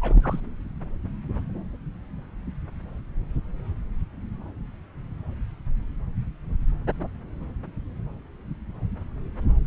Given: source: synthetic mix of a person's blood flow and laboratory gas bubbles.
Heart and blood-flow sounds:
Doppler ultrasound of blood flow; subclavian vein
0.01-0.41 s: bubbles
From the record:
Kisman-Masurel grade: 221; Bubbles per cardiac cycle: several, 3 to 8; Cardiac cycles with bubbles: 10 to 50%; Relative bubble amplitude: barely perceptible (0.100 to 0.250); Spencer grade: 2 (many but less than half of the cardiac periods contain bubble signals, singularly or in groups); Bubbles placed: anywhere in the cardiac cycle

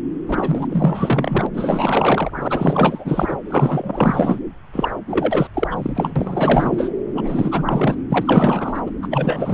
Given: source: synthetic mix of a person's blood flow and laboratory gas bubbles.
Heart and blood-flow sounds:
Doppler ultrasound of blood flow; subclavian vein
0.28-1.47 s: bubbles
1.53-2.31 s: bubbles
2.35-3.38 s: bubbles
3.45-4.40 s: bubbles
4.72-4.91 s: bubbles
5.07-5.47 s: bubbles
5.54-5.67 s: bubbles
5.71-6.13 s: bubbles
6.16-6.91 s: bubbles
7.15-7.95 s: bubbles
8.09-8.83 s: bubbles
8.86-8.92 s: bubbles
9.02-9.08 s: bubbles
9.11-9.54 s: bubbles
From the record:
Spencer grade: 4 (maximum detectable bubble signal sounding continuously throughout systole and diastole of every cardiac period, and overriding the amplitude of the normal cardiac signals); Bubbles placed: anywhere in the cardiac cycle

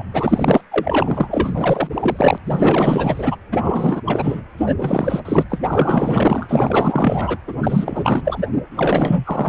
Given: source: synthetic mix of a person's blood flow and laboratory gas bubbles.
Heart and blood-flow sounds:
Doppler ultrasound of blood flow; precordium
0.00-0.03 s: bubbles
0.13-0.61 s: bubbles
0.71-1.89 s: bubbles
1.94-2.38 s: bubbles
2.45-3.35 s: bubbles
3.52-3.58 s: bubbles
3.61-4.03 s: bubbles
4.05-4.42 s: bubbles
4.58-4.75 s: bubbles
4.78-5.46 s: bubbles
5.49-5.59 s: bubbles
5.67-7.38 s: bubbles
7.47-8.46 s: bubbles
8.71-9.49 s: bubbles
From the record:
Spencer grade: 4 (maximum detectable bubble signal sounding continuously throughout systole and diastole of every cardiac period, and overriding the amplitude of the normal cardiac signals); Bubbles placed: anywhere in the cardiac cycle

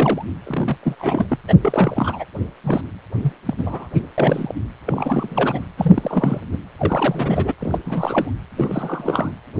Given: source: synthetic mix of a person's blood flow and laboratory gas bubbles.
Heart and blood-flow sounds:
Doppler ultrasound of blood flow; precordium
0.00-0.25 s: bubbles
0.43-0.78 s: bubbles
0.83-0.95 s: bubbles
0.99-1.38 s: bubbles
1.48-1.54 s: bubbles
1.62-2.25 s: bubbles
2.63-2.81 s: bubbles
3.23-3.33 s: bubbles
3.46-3.54 s: bubbles
3.58-3.89 s: bubbles
3.93-4.00 s: bubbles
4.18-4.55 s: bubbles
4.86-5.66 s: bubbles
5.78-6.42 s: bubbles
6.52-6.58 s: bubbles
6.78-7.54 s: bubbles
7.60-7.79 s: bubbles
7.85-8.30 s: bubbles
8.56-9.35 s: bubbles
From the record:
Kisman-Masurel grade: 342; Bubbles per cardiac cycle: rolling drumbeat, 9 or more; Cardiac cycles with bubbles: 100%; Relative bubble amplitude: moderate (0.250 to 0.450); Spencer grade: 3 (all of the cardiac periods contain showers or single bubble signals, but not dominating or overriding the cardiac motion signals); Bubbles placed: anywhere in the cardiac cycle

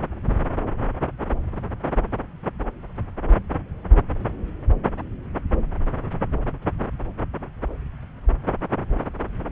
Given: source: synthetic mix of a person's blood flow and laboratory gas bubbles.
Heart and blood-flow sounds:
Doppler ultrasound of blood flow; subclavian vein
no bubbles
From the record:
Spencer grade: 0 (complete lack of bubble signals)

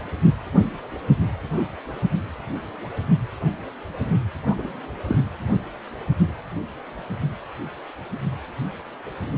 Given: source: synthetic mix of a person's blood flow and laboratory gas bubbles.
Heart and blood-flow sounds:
Doppler ultrasound of blood flow; precordium
4.46-4.80 s: bubbles
5.07-5.18 s: bubbles
From the record:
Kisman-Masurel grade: 112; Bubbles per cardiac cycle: 1 to 2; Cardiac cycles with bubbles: 1 to 10%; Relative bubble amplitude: moderate (0.250 to 0.450); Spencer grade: 1 (occasional bubble signal discernible with the cardiac motion signal, with majority of cardiac periods free of bubbles); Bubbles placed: anywhere in the cardiac cycle

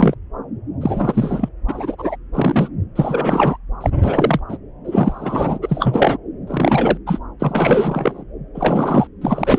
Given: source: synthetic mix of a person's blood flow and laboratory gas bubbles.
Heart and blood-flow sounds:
Doppler ultrasound of blood flow; subclavian vein
0.00-0.15 s: bubbles
0.81-1.48 s: bubbles
1.68-1.96 s: bubbles
1.98-2.16 s: bubbles
2.33-2.69 s: bubbles
2.96-3.57 s: bubbles
3.81-3.90 s: bubbles
4.02-4.40 s: bubbles
4.49-4.58 s: bubbles
4.85-5.58 s: bubbles
5.62-6.18 s: bubbles
6.47-6.98 s: bubbles
7.06-7.19 s: bubbles
7.39-8.24 s: bubbles
8.55-9.07 s: bubbles
9.21-9.59 s: bubbles
From the record:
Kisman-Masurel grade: 343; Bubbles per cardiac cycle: rolling drumbeat, 9 or more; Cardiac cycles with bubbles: 100%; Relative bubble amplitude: loud (0.450 to 0.775); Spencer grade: 3 (all of the cardiac periods contain showers or single bubble signals, but not dominating or overriding the cardiac motion signals); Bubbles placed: anywhere in the cardiac cycle

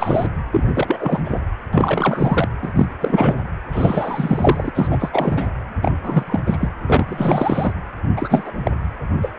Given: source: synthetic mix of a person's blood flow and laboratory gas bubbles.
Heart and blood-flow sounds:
Doppler ultrasound of blood flow; precordium
0.00-0.27 s: bubbles
0.52-1.21 s: bubbles
1.24-1.40 s: bubbles
1.73-2.49 s: bubbles
2.62-2.72 s: bubbles
2.75-2.87 s: bubbles
3.00-3.38 s: bubbles
3.72-4.71 s: bubbles
4.75-5.47 s: bubbles
5.82-5.92 s: bubbles
6.03-6.23 s: bubbles
6.26-6.43 s: bubbles
6.46-6.57 s: bubbles
6.59-6.69 s: bubbles
6.86-7.73 s: bubbles
8.16-8.52 s: bubbles
8.63-8.71 s: bubbles
9.21-9.32 s: bubbles
From the record:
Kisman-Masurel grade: 343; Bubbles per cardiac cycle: rolling drumbeat, 9 or more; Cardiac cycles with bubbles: 100%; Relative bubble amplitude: loud (0.450 to 0.775); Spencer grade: 3 (all of the cardiac periods contain showers or single bubble signals, but not dominating or overriding the cardiac motion signals); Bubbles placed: anywhere in the cardiac cycle

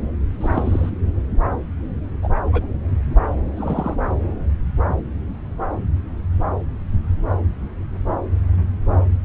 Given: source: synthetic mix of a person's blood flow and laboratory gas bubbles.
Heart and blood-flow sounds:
Doppler ultrasound of blood flow; subclavian vein
0.40-0.90 s: bubbles
2.22-2.29 s: bubbles
2.52-2.67 s: bubbles
3.56-3.95 s: bubbles
From the record:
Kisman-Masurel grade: 122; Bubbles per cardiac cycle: 1 to 2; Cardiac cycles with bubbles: 10 to 50%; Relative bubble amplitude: moderate (0.250 to 0.450); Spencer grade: 2 (many but less than half of the cardiac periods contain bubble signals, singularly or in groups); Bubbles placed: anywhere in the cardiac cycle

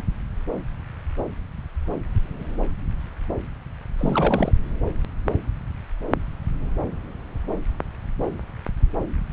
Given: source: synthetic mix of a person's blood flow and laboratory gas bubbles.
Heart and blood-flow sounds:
Doppler ultrasound of blood flow; subclavian vein
3.98-4.52 s: bubbles
From the record:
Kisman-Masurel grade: 211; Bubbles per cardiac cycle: several, 3 to 8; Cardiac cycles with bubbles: 1 to 10%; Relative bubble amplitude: barely perceptible (0.100 to 0.250); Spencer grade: 1 (occasional bubble signal discernible with the cardiac motion signal, with majority of cardiac periods free of bubbles); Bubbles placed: anywhere in the cardiac cycle

